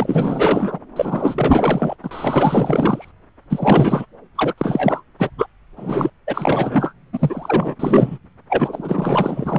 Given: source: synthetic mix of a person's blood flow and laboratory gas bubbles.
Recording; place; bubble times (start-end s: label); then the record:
Doppler ultrasound of blood flow; subclavian vein
0.00-0.80 s: bubbles
0.96-1.95 s: bubbles
2.03-3.12 s: bubbles
3.50-4.05 s: bubbles
4.35-4.53 s: bubbles
4.58-5.03 s: bubbles
5.18-5.30 s: bubbles
5.38-5.47 s: bubbles
5.76-6.10 s: bubbles
6.27-6.93 s: bubbles
7.12-7.75 s: bubbles
7.79-8.18 s: bubbles
8.48-9.59 s: bubbles
From the record:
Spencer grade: 4 (maximum detectable bubble signal sounding continuously throughout systole and diastole of every cardiac period, and overriding the amplitude of the normal cardiac signals); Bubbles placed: anywhere in the cardiac cycle